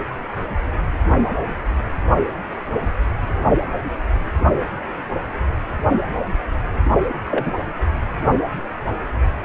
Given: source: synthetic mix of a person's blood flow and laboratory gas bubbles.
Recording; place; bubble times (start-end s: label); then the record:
Doppler ultrasound of blood flow; precordium
7.30-7.54 s: bubbles
From the record:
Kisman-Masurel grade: 123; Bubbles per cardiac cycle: 1 to 2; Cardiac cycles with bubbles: 10 to 50%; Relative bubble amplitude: loud (0.450 to 0.775); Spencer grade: 2 (many but less than half of the cardiac periods contain bubble signals, singularly or in groups); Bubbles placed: anywhere in the cardiac cycle